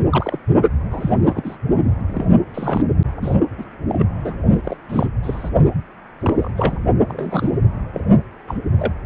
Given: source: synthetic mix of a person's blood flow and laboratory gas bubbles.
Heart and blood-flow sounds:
Doppler ultrasound of blood flow; precordium
0.12-0.39 s: bubbles
0.90-1.57 s: bubbles
2.07-2.25 s: bubbles
2.54-2.83 s: bubbles
3.21-3.35 s: bubbles
3.58-3.65 s: bubbles
3.89-4.05 s: bubbles
4.24-4.34 s: bubbles
4.50-4.77 s: bubbles
4.89-5.07 s: bubbles
5.22-5.50 s: bubbles
6.20-6.52 s: bubbles
6.57-6.77 s: bubbles
7.08-7.58 s: bubbles
7.94-8.00 s: bubbles
8.47-8.57 s: bubbles
8.78-8.92 s: bubbles
From the record:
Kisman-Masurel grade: 242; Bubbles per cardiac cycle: several, 3 to 8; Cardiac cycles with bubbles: 100%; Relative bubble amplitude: moderate (0.250 to 0.450); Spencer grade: 3 (all of the cardiac periods contain showers or single bubble signals, but not dominating or overriding the cardiac motion signals); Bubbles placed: only in the low amplitude regions of the cardiac cycle

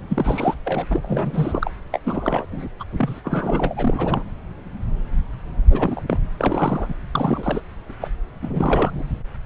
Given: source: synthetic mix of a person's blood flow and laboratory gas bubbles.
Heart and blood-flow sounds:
Doppler ultrasound of blood flow; subclavian vein
0.08-0.54 s: bubbles
0.65-0.86 s: bubbles
0.90-1.71 s: bubbles
1.92-1.99 s: bubbles
2.05-2.46 s: bubbles
2.52-2.68 s: bubbles
2.80-2.84 s: bubbles
2.97-3.20 s: bubbles
3.24-4.24 s: bubbles
5.70-6.02 s: bubbles
6.06-6.19 s: bubbles
6.38-6.95 s: bubbles
7.15-7.62 s: bubbles
8.01-8.07 s: bubbles
8.41-9.04 s: bubbles
From the record:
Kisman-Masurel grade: 332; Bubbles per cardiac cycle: rolling drumbeat, 9 or more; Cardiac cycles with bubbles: 50 to 99%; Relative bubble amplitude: moderate (0.250 to 0.450); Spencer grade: 3 (all of the cardiac periods contain showers or single bubble signals, but not dominating or overriding the cardiac motion signals); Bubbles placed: anywhere in the cardiac cycle

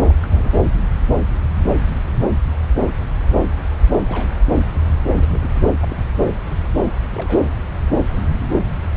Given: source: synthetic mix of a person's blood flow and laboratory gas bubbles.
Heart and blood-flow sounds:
Doppler ultrasound of blood flow; subclavian vein
0.08-0.14 s: bubbles
0.23-0.51 s: bubbles
3.97-4.00 s: bubbles
4.05-4.32 s: bubbles
5.15-5.66 s: bubbles
5.76-5.96 s: bubbles
7.15-7.54 s: bubbles
From the record:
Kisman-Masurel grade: 221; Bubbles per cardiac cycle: several, 3 to 8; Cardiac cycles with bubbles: 10 to 50%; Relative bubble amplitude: barely perceptible (0.100 to 0.250); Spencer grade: 2 (many but less than half of the cardiac periods contain bubble signals, singularly or in groups); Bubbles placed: anywhere in the cardiac cycle

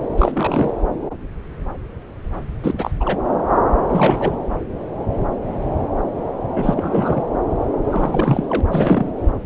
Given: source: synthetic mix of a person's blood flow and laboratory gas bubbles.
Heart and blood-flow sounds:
Doppler ultrasound of blood flow; subclavian vein
0.17-0.72 s: bubbles
2.62-2.75 s: bubbles
2.77-2.92 s: bubbles
3.00-3.19 s: bubbles
3.89-4.41 s: bubbles
6.55-7.26 s: bubbles
7.92-8.61 s: bubbles
8.69-9.12 s: bubbles
From the record:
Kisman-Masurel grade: 222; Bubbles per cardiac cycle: several, 3 to 8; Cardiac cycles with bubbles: 10 to 50%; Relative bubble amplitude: moderate (0.250 to 0.450); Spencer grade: 2 (many but less than half of the cardiac periods contain bubble signals, singularly or in groups); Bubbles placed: anywhere in the cardiac cycle

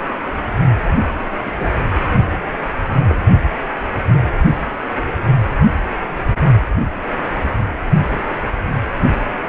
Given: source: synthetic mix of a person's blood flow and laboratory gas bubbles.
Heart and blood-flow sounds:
Doppler ultrasound of blood flow; precordium
1.45-1.52 s: bubbles
1.59-1.68 s: bubbles
3.08-3.15 s: bubbles
From the record:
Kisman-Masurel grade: 122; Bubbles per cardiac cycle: 1 to 2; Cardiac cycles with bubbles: 10 to 50%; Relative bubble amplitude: moderate (0.250 to 0.450); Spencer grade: 2 (many but less than half of the cardiac periods contain bubble signals, singularly or in groups); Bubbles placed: only in the low amplitude regions of the cardiac cycle

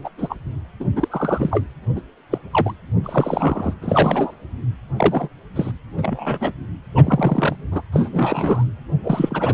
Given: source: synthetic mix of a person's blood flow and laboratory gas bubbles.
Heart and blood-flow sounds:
Doppler ultrasound of blood flow; precordium
0.04-0.09 s: bubbles
0.17-0.36 s: bubbles
0.80-0.84 s: bubbles
0.95-1.66 s: bubbles
1.96-2.01 s: bubbles
2.31-2.38 s: bubbles
2.51-2.73 s: bubbles
3.04-3.74 s: bubbles
3.81-4.33 s: bubbles
4.96-5.28 s: bubbles
5.55-5.71 s: bubbles
5.97-6.51 s: bubbles
6.95-7.56 s: bubbles
7.71-7.82 s: bubbles
7.92-8.10 s: bubbles
8.12-8.64 s: bubbles
9.04-9.53 s: bubbles
From the record:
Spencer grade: 3 (all of the cardiac periods contain showers or single bubble signals, but not dominating or overriding the cardiac motion signals); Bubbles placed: anywhere in the cardiac cycle

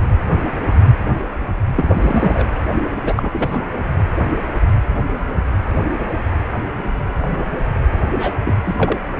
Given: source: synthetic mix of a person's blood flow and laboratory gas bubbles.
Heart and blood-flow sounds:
Doppler ultrasound of blood flow; precordium
1.76-2.47 s: bubbles
3.05-3.75 s: bubbles
8.14-8.33 s: bubbles
8.44-8.54 s: bubbles
8.63-8.97 s: bubbles
From the record:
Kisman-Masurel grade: 222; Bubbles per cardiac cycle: several, 3 to 8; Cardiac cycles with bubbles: 10 to 50%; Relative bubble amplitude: moderate (0.250 to 0.450); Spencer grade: 2 (many but less than half of the cardiac periods contain bubble signals, singularly or in groups); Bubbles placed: anywhere in the cardiac cycle

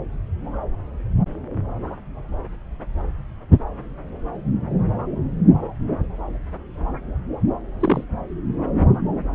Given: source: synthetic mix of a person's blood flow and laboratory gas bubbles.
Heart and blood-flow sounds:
Doppler ultrasound of blood flow; subclavian vein
7.79-8.04 s: bubbles
From the record:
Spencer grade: 1 (occasional bubble signal discernible with the cardiac motion signal, with majority of cardiac periods free of bubbles); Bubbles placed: anywhere in the cardiac cycle

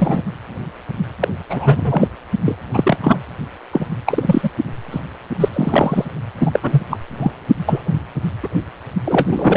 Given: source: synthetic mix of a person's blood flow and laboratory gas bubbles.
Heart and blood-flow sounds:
Doppler ultrasound of blood flow; precordium
0.00-0.23 s: bubbles
1.21-1.28 s: bubbles
1.50-2.07 s: bubbles
2.44-2.55 s: bubbles
2.72-2.97 s: bubbles
3.02-3.19 s: bubbles
3.73-3.86 s: bubbles
4.07-4.50 s: bubbles
4.91-5.01 s: bubbles
5.40-5.49 s: bubbles
5.53-6.05 s: bubbles
6.38-6.82 s: bubbles
6.90-6.98 s: bubbles
7.20-7.32 s: bubbles
7.67-7.81 s: bubbles
8.43-8.47 s: bubbles
9.05-9.57 s: bubbles
From the record:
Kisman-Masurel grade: 233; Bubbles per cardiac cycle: several, 3 to 8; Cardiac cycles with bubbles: 50 to 99%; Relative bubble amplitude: loud (0.450 to 0.775); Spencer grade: 3 (all of the cardiac periods contain showers or single bubble signals, but not dominating or overriding the cardiac motion signals); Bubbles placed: only in the low amplitude regions of the cardiac cycle

